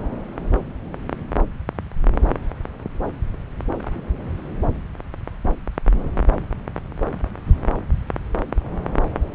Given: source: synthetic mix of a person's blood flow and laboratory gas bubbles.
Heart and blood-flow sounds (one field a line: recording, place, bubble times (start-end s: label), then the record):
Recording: Doppler ultrasound of blood flow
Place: subclavian vein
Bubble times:
no bubbles
From the record:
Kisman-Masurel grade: 000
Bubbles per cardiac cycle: 0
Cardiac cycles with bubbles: 0%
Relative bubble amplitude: no bubbles discernible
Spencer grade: 0 (complete lack of bubble signals)